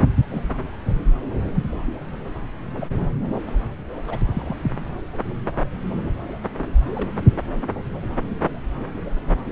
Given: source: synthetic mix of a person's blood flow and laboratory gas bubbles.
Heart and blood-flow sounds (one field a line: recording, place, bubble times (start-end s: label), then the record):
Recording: Doppler ultrasound of blood flow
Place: subclavian vein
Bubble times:
0.33-0.41 s: bubbles
2.75-3.06 s: bubbles
4.08-4.18 s: bubbles
4.21-4.24 s: bubbles
4.33-4.57 s: bubbles
6.95-7.11 s: bubbles
From the record:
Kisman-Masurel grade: 121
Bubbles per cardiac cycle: 1 to 2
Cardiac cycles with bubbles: 10 to 50%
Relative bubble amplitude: barely perceptible (0.100 to 0.250)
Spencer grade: 2 (many but less than half of the cardiac periods contain bubble signals, singularly or in groups)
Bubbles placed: anywhere in the cardiac cycle